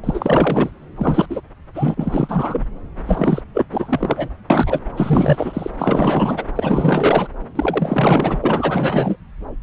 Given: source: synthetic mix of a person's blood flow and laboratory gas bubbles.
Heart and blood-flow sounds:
Doppler ultrasound of blood flow; subclavian vein
0.04-0.70 s: bubbles
0.95-1.27 s: bubbles
1.29-1.41 s: bubbles
1.74-2.67 s: bubbles
3.06-3.42 s: bubbles
3.54-3.66 s: bubbles
3.72-4.29 s: bubbles
4.50-4.80 s: bubbles
4.96-5.71 s: bubbles
5.78-6.45 s: bubbles
6.55-7.28 s: bubbles
7.55-8.40 s: bubbles
8.43-9.16 s: bubbles
From the record:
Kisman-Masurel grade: 444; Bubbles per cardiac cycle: continuous sound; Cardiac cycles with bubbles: 100%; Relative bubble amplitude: maximal (0.775 to 0.999); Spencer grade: 4 (maximum detectable bubble signal sounding continuously throughout systole and diastole of every cardiac period, and overriding the amplitude of the normal cardiac signals); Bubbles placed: anywhere in the cardiac cycle

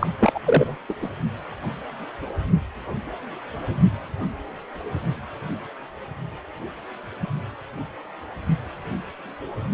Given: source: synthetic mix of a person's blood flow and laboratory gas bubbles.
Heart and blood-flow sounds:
Doppler ultrasound of blood flow; precordium
0.00-0.07 s: bubbles
0.19-0.32 s: bubbles
0.34-0.40 s: bubbles
0.46-0.76 s: bubbles
0.89-0.94 s: bubbles
1.02-1.10 s: bubbles
From the record:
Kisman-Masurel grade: 212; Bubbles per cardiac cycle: several, 3 to 8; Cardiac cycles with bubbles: 1 to 10%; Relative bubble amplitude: moderate (0.250 to 0.450); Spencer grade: 1 (occasional bubble signal discernible with the cardiac motion signal, with majority of cardiac periods free of bubbles); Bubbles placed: only in the low amplitude regions of the cardiac cycle

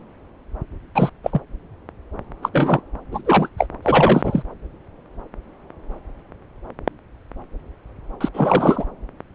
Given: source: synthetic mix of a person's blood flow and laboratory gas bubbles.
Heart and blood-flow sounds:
Doppler ultrasound of blood flow; subclavian vein
0.95-1.10 s: bubbles
1.23-1.41 s: bubbles
2.42-2.49 s: bubbles
2.52-2.81 s: bubbles
3.11-3.22 s: bubbles
3.25-3.49 s: bubbles
3.57-3.67 s: bubbles
3.82-4.42 s: bubbles
8.21-8.29 s: bubbles
8.34-8.86 s: bubbles
From the record:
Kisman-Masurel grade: 223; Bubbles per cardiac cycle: several, 3 to 8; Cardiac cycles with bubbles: 10 to 50%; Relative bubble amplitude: loud (0.450 to 0.775); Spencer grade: 2 (many but less than half of the cardiac periods contain bubble signals, singularly or in groups); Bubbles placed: anywhere in the cardiac cycle

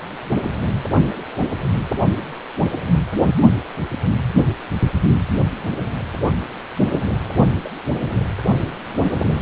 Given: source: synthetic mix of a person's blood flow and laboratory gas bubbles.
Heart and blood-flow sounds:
Doppler ultrasound of blood flow; precordium
7.64-7.68 s: bubbles
From the record:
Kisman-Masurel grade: 112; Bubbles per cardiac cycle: 1 to 2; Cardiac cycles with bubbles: 1 to 10%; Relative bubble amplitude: moderate (0.250 to 0.450); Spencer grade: 1 (occasional bubble signal discernible with the cardiac motion signal, with majority of cardiac periods free of bubbles); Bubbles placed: anywhere in the cardiac cycle

